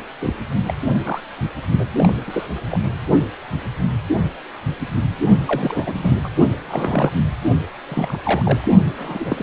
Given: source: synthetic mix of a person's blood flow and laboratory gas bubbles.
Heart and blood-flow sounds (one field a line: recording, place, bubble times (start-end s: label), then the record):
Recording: Doppler ultrasound of blood flow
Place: precordium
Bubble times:
0.21-0.33 s: bubbles
0.67-0.74 s: bubbles
0.85-1.26 s: bubbles
1.31-1.45 s: bubbles
1.79-1.86 s: bubbles
1.96-2.13 s: bubbles
2.27-2.46 s: bubbles
2.69-2.79 s: bubbles
5.47-6.16 s: bubbles
6.24-6.29 s: bubbles
6.68-7.12 s: bubbles
7.88-8.18 s: bubbles
8.24-8.68 s: bubbles
8.98-9.43 s: bubbles
From the record:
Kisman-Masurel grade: 232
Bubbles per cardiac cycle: several, 3 to 8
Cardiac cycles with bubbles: 50 to 99%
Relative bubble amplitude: moderate (0.250 to 0.450)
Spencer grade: 3 (all of the cardiac periods contain showers or single bubble signals, but not dominating or overriding the cardiac motion signals)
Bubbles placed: only in the low amplitude regions of the cardiac cycle